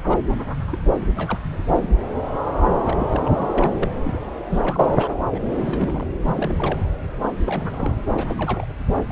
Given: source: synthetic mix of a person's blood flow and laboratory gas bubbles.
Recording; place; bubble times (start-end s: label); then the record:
Doppler ultrasound of blood flow; subclavian vein
0.00-0.18 s: bubbles
0.72-0.79 s: bubbles
0.95-1.06 s: bubbles
1.15-1.38 s: bubbles
1.50-1.64 s: bubbles
1.74-1.96 s: bubbles
2.83-3.53 s: bubbles
3.58-3.89 s: bubbles
4.03-4.20 s: bubbles
4.49-5.16 s: bubbles
5.32-5.40 s: bubbles
5.49-6.04 s: bubbles
6.23-6.55 s: bubbles
6.58-6.79 s: bubbles
7.45-8.04 s: bubbles
8.12-8.65 s: bubbles
9.07-9.12 s: bubbles
From the record:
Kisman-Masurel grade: 332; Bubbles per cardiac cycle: rolling drumbeat, 9 or more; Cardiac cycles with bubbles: 50 to 99%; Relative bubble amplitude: moderate (0.250 to 0.450); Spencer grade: 3 (all of the cardiac periods contain showers or single bubble signals, but not dominating or overriding the cardiac motion signals); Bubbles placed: anywhere in the cardiac cycle